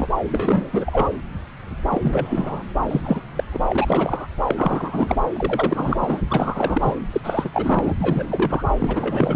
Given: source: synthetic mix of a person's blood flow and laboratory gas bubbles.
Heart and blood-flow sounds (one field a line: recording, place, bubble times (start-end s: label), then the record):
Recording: Doppler ultrasound of blood flow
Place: subclavian vein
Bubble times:
0.00-0.09 s: bubbles
0.31-1.11 s: bubbles
1.91-2.63 s: bubbles
2.80-3.22 s: bubbles
3.35-3.44 s: bubbles
3.52-3.60 s: bubbles
3.69-4.27 s: bubbles
4.48-5.16 s: bubbles
5.33-6.21 s: bubbles
6.28-6.96 s: bubbles
7.12-7.21 s: bubbles
7.23-7.50 s: bubbles
7.53-7.93 s: bubbles
8.00-8.64 s: bubbles
8.79-9.36 s: bubbles
From the record:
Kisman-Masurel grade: 333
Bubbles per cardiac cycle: rolling drumbeat, 9 or more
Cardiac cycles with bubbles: 50 to 99%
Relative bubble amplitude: loud (0.450 to 0.775)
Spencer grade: 3 (all of the cardiac periods contain showers or single bubble signals, but not dominating or overriding the cardiac motion signals)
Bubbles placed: anywhere in the cardiac cycle